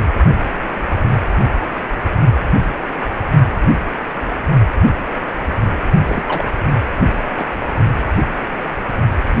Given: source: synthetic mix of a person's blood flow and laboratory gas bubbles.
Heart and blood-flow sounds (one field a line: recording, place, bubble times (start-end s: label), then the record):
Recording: Doppler ultrasound of blood flow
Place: precordium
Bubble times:
6.04-6.24 s: bubbles
6.28-6.45 s: bubbles
7.25-7.45 s: bubbles
From the record:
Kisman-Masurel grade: 212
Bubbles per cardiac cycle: several, 3 to 8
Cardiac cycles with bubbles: 1 to 10%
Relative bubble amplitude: moderate (0.250 to 0.450)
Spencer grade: 1 (occasional bubble signal discernible with the cardiac motion signal, with majority of cardiac periods free of bubbles)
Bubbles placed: only in the low amplitude regions of the cardiac cycle